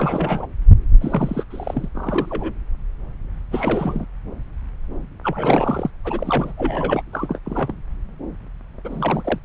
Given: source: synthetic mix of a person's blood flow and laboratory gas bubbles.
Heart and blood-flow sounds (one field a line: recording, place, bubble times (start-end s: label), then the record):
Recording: Doppler ultrasound of blood flow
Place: subclavian vein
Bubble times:
0.00-0.47 s: bubbles
1.01-1.45 s: bubbles
1.50-1.89 s: bubbles
1.94-2.52 s: bubbles
3.50-4.05 s: bubbles
5.23-5.90 s: bubbles
6.04-6.52 s: bubbles
6.57-7.02 s: bubbles
7.12-7.38 s: bubbles
7.45-7.72 s: bubbles
8.84-9.38 s: bubbles
From the record:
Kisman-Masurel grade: 232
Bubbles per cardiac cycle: several, 3 to 8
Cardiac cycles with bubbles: 50 to 99%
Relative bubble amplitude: moderate (0.250 to 0.450)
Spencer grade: 3 (all of the cardiac periods contain showers or single bubble signals, but not dominating or overriding the cardiac motion signals)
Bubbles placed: anywhere in the cardiac cycle